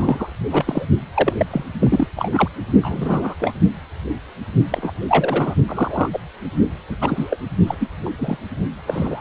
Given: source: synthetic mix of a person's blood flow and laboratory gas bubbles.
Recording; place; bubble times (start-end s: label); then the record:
Doppler ultrasound of blood flow; precordium
0.00-0.27 s: bubbles
0.52-0.85 s: bubbles
1.14-1.33 s: bubbles
1.38-1.46 s: bubbles
1.50-1.64 s: bubbles
1.79-2.07 s: bubbles
2.16-2.48 s: bubbles
2.82-3.34 s: bubbles
3.40-3.53 s: bubbles
4.70-4.93 s: bubbles
5.08-5.54 s: bubbles
5.68-6.10 s: bubbles
6.12-6.20 s: bubbles
6.89-6.97 s: bubbles
7.01-7.38 s: bubbles
7.67-7.75 s: bubbles
7.79-7.91 s: bubbles
8.05-8.10 s: bubbles
8.18-8.38 s: bubbles
8.85-9.21 s: bubbles
From the record:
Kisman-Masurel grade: 243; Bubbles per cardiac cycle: several, 3 to 8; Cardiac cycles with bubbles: 100%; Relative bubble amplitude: loud (0.450 to 0.775); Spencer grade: 3 (all of the cardiac periods contain showers or single bubble signals, but not dominating or overriding the cardiac motion signals); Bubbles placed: only in the low amplitude regions of the cardiac cycle